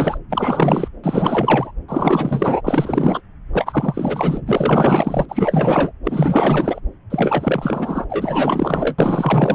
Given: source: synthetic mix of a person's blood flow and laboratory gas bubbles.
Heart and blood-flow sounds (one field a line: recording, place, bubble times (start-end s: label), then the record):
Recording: Doppler ultrasound of blood flow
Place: subclavian vein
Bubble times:
0.00-0.18 s: bubbles
0.29-0.88 s: bubbles
1.03-1.72 s: bubbles
1.88-3.21 s: bubbles
3.53-4.41 s: bubbles
4.46-5.25 s: bubbles
5.29-5.92 s: bubbles
6.04-6.80 s: bubbles
7.10-8.05 s: bubbles
8.09-8.95 s: bubbles
8.98-9.55 s: bubbles
From the record:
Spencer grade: 4 (maximum detectable bubble signal sounding continuously throughout systole and diastole of every cardiac period, and overriding the amplitude of the normal cardiac signals)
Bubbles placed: anywhere in the cardiac cycle